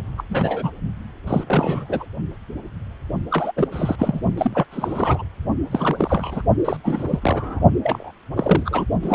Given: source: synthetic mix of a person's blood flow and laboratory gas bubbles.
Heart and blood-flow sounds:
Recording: Doppler ultrasound of blood flow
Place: precordium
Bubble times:
0.18-0.23 s: bubbles
0.30-0.70 s: bubbles
1.27-1.44 s: bubbles
1.46-2.05 s: bubbles
3.30-3.51 s: bubbles
3.56-3.67 s: bubbles
3.71-3.96 s: bubbles
3.98-4.21 s: bubbles
4.37-4.65 s: bubbles
4.71-5.24 s: bubbles
5.71-6.42 s: bubbles
6.64-6.76 s: bubbles
6.83-7.19 s: bubbles
7.21-7.60 s: bubbles
7.83-8.11 s: bubbles
8.37-8.86 s: bubbles
9.02-9.15 s: bubbles
From the record:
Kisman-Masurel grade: 342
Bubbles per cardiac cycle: rolling drumbeat, 9 or more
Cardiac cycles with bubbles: 100%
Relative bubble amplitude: moderate (0.250 to 0.450)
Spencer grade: 3 (all of the cardiac periods contain showers or single bubble signals, but not dominating or overriding the cardiac motion signals)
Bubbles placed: only in the low amplitude regions of the cardiac cycle

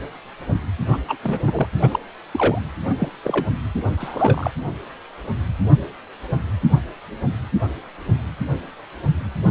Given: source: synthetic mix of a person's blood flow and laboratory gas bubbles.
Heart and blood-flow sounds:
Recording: Doppler ultrasound of blood flow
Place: precordium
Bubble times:
0.88-0.98 s: bubbles
1.08-1.17 s: bubbles
1.23-1.68 s: bubbles
1.82-2.00 s: bubbles
2.31-2.61 s: bubbles
2.89-2.96 s: bubbles
3.00-3.08 s: bubbles
3.23-3.46 s: bubbles
3.97-4.51 s: bubbles
From the record:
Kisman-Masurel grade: 222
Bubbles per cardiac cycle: several, 3 to 8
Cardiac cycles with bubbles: 10 to 50%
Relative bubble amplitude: moderate (0.250 to 0.450)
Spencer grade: 2 (many but less than half of the cardiac periods contain bubble signals, singularly or in groups)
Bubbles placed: anywhere in the cardiac cycle

